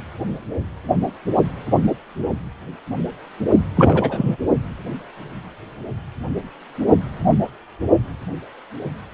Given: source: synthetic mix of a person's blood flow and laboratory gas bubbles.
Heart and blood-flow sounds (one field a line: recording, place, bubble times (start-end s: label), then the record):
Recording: Doppler ultrasound of blood flow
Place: precordium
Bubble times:
3.76-4.36 s: bubbles
From the record:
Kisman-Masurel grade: 213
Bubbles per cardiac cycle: several, 3 to 8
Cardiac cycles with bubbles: 1 to 10%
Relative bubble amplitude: loud (0.450 to 0.775)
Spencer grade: 1 (occasional bubble signal discernible with the cardiac motion signal, with majority of cardiac periods free of bubbles)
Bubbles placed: only in the low amplitude regions of the cardiac cycle